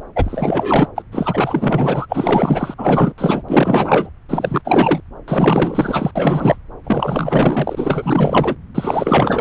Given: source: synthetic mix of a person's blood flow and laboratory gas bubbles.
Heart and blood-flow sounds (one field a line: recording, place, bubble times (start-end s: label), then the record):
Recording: Doppler ultrasound of blood flow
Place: subclavian vein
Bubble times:
0.15-0.88 s: bubbles
0.95-1.03 s: bubbles
1.11-2.06 s: bubbles
2.09-2.74 s: bubbles
2.77-3.13 s: bubbles
3.17-3.42 s: bubbles
3.48-4.09 s: bubbles
4.29-4.62 s: bubbles
4.65-5.00 s: bubbles
5.28-6.11 s: bubbles
6.15-6.57 s: bubbles
6.84-8.56 s: bubbles
8.74-9.41 s: bubbles
From the record:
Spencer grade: 4 (maximum detectable bubble signal sounding continuously throughout systole and diastole of every cardiac period, and overriding the amplitude of the normal cardiac signals)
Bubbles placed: anywhere in the cardiac cycle